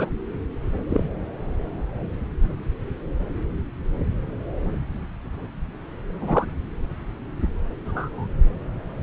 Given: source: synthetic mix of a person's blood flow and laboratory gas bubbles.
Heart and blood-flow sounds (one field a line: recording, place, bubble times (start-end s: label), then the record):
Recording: Doppler ultrasound of blood flow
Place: subclavian vein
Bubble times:
0.00-0.10 s: bubbles
0.89-1.04 s: bubbles
6.21-6.45 s: bubbles
7.85-8.27 s: bubbles
From the record:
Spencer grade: 2 (many but less than half of the cardiac periods contain bubble signals, singularly or in groups)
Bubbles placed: anywhere in the cardiac cycle